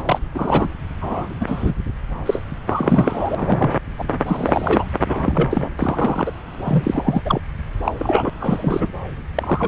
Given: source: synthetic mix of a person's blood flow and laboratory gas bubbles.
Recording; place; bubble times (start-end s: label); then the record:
Doppler ultrasound of blood flow; subclavian vein
0.05-0.18 s: bubbles
0.35-0.72 s: bubbles
1.00-1.29 s: bubbles
1.40-1.74 s: bubbles
2.25-2.42 s: bubbles
2.67-3.35 s: bubbles
3.38-3.69 s: bubbles
3.98-4.04 s: bubbles
4.26-4.85 s: bubbles
5.05-5.69 s: bubbles
5.79-6.32 s: bubbles
6.64-7.22 s: bubbles
7.25-7.42 s: bubbles
7.84-7.93 s: bubbles
7.99-8.30 s: bubbles
8.40-8.88 s: bubbles
9.35-9.68 s: bubbles
From the record:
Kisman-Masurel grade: 242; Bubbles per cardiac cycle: several, 3 to 8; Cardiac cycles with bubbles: 100%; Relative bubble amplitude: moderate (0.250 to 0.450); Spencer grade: 3 (all of the cardiac periods contain showers or single bubble signals, but not dominating or overriding the cardiac motion signals); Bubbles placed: anywhere in the cardiac cycle